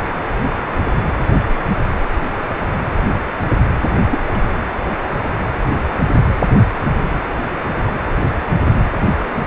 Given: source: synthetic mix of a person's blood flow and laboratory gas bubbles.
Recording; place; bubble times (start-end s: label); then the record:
Doppler ultrasound of blood flow; precordium
4.10-4.20 s: bubbles
4.33-4.38 s: bubbles
5.75-5.81 s: bubbles
From the record:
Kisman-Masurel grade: 122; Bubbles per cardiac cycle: 1 to 2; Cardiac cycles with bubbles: 10 to 50%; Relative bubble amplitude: moderate (0.250 to 0.450); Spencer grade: 2 (many but less than half of the cardiac periods contain bubble signals, singularly or in groups); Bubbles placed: anywhere in the cardiac cycle